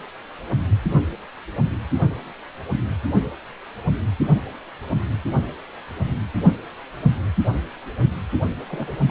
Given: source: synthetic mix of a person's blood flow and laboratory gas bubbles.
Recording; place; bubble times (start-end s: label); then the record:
Doppler ultrasound of blood flow; precordium
8.69-8.99 s: bubbles
9.03-9.11 s: bubbles
From the record:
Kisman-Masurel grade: 211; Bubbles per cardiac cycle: several, 3 to 8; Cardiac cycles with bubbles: 1 to 10%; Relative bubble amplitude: barely perceptible (0.100 to 0.250); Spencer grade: 1 (occasional bubble signal discernible with the cardiac motion signal, with majority of cardiac periods free of bubbles); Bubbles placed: only in the low amplitude regions of the cardiac cycle